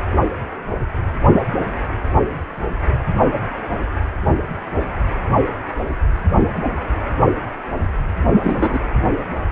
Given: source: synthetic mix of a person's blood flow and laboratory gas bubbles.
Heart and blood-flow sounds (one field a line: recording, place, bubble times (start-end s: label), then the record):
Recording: Doppler ultrasound of blood flow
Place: precordium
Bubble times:
8.43-8.79 s: bubbles
From the record:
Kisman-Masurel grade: 113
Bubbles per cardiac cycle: 1 to 2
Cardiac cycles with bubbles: 1 to 10%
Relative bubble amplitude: loud (0.450 to 0.775)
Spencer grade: 1 (occasional bubble signal discernible with the cardiac motion signal, with majority of cardiac periods free of bubbles)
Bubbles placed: anywhere in the cardiac cycle